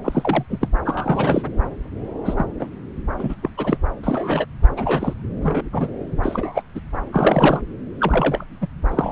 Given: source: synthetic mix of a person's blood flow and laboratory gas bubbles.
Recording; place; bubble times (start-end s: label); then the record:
Doppler ultrasound of blood flow; subclavian vein
0.04-0.44 s: bubbles
0.50-0.58 s: bubbles
0.60-0.69 s: bubbles
0.84-1.43 s: bubbles
2.25-2.46 s: bubbles
2.59-2.67 s: bubbles
3.18-3.36 s: bubbles
3.42-3.50 s: bubbles
3.57-3.78 s: bubbles
4.03-4.46 s: bubbles
4.77-5.14 s: bubbles
5.43-5.62 s: bubbles
5.72-5.91 s: bubbles
6.23-6.62 s: bubbles
6.75-6.80 s: bubbles
7.12-7.60 s: bubbles
8.00-8.44 s: bubbles
8.61-8.67 s: bubbles
8.89-9.12 s: bubbles
From the record:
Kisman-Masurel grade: 233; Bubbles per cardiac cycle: several, 3 to 8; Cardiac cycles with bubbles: 50 to 99%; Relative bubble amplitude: loud (0.450 to 0.775); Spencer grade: 3 (all of the cardiac periods contain showers or single bubble signals, but not dominating or overriding the cardiac motion signals); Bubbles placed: anywhere in the cardiac cycle